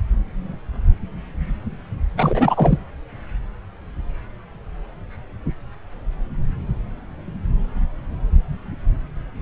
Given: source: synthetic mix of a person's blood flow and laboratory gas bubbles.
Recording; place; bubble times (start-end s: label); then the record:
Doppler ultrasound of blood flow; subclavian vein
2.17-2.78 s: bubbles
From the record:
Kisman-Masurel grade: 213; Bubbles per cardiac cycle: several, 3 to 8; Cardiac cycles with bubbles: 1 to 10%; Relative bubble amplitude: loud (0.450 to 0.775); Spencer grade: 1 (occasional bubble signal discernible with the cardiac motion signal, with majority of cardiac periods free of bubbles); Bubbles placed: anywhere in the cardiac cycle